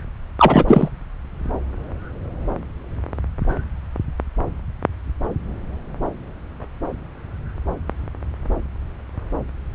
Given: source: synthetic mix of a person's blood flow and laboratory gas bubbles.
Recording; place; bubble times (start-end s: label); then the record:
Doppler ultrasound of blood flow; subclavian vein
0.39-0.64 s: bubbles
0.67-0.89 s: bubbles
From the record:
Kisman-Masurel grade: 213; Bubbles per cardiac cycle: several, 3 to 8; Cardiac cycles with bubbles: 1 to 10%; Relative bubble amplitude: loud (0.450 to 0.775); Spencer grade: 1 (occasional bubble signal discernible with the cardiac motion signal, with majority of cardiac periods free of bubbles); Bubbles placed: anywhere in the cardiac cycle